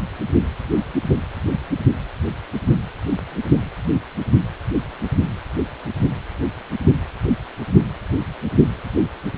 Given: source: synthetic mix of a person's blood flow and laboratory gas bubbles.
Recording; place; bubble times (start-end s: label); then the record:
Doppler ultrasound of blood flow; precordium
no bubbles
From the record:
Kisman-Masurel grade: 000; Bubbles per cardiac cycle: 0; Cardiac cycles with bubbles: 0%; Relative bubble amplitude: no bubbles discernible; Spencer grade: 0 (complete lack of bubble signals)